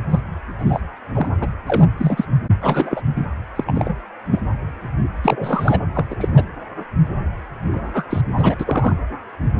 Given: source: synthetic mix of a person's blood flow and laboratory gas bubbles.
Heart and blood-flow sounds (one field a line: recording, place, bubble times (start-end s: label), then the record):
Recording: Doppler ultrasound of blood flow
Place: precordium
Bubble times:
0.10-0.20 s: bubbles
0.58-0.79 s: bubbles
1.13-1.28 s: bubbles
1.40-1.48 s: bubbles
1.66-1.88 s: bubbles
1.98-2.26 s: bubbles
2.61-3.02 s: bubbles
3.16-3.25 s: bubbles
3.56-3.96 s: bubbles
4.29-4.40 s: bubbles
5.23-5.80 s: bubbles
5.95-6.05 s: bubbles
6.10-6.15 s: bubbles
6.20-6.29 s: bubbles
6.33-6.45 s: bubbles
7.71-8.03 s: bubbles
8.09-8.21 s: bubbles
8.37-8.55 s: bubbles
8.59-8.96 s: bubbles
From the record:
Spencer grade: 3 (all of the cardiac periods contain showers or single bubble signals, but not dominating or overriding the cardiac motion signals)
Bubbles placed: anywhere in the cardiac cycle